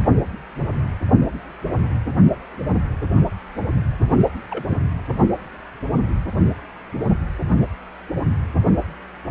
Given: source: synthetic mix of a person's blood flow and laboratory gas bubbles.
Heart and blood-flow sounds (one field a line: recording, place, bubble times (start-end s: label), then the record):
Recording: Doppler ultrasound of blood flow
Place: precordium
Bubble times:
4.10-4.15 s: bubbles
4.19-4.26 s: bubbles
4.50-4.64 s: bubbles
4.69-4.77 s: bubbles
From the record:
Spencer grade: 1 (occasional bubble signal discernible with the cardiac motion signal, with majority of cardiac periods free of bubbles)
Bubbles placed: only in the low amplitude regions of the cardiac cycle